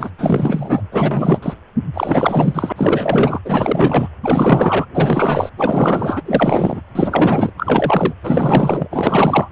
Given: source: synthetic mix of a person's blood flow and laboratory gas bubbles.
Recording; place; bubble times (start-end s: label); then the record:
Doppler ultrasound of blood flow; precordium
0.00-0.12 s: bubbles
0.18-0.82 s: bubbles
0.92-1.54 s: bubbles
1.94-2.73 s: bubbles
2.76-3.39 s: bubbles
3.45-4.08 s: bubbles
4.22-4.86 s: bubbles
4.94-5.50 s: bubbles
5.57-6.22 s: bubbles
6.25-6.82 s: bubbles
6.95-7.51 s: bubbles
7.58-8.13 s: bubbles
8.23-8.88 s: bubbles
8.90-9.49 s: bubbles
From the record:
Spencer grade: 4 (maximum detectable bubble signal sounding continuously throughout systole and diastole of every cardiac period, and overriding the amplitude of the normal cardiac signals); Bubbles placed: anywhere in the cardiac cycle